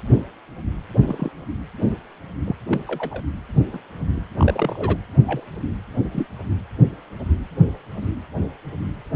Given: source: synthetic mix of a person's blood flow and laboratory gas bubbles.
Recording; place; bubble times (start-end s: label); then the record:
Doppler ultrasound of blood flow; precordium
1.07-1.30 s: bubbles
2.45-2.56 s: bubbles
2.71-2.78 s: bubbles
2.87-3.23 s: bubbles
3.73-3.79 s: bubbles
4.16-4.21 s: bubbles
4.37-4.97 s: bubbles
5.26-5.48 s: bubbles
6.12-6.26 s: bubbles
From the record:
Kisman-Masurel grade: 122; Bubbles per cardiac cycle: 1 to 2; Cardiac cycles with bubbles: 10 to 50%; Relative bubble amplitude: moderate (0.250 to 0.450); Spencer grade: 2 (many but less than half of the cardiac periods contain bubble signals, singularly or in groups); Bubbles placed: anywhere in the cardiac cycle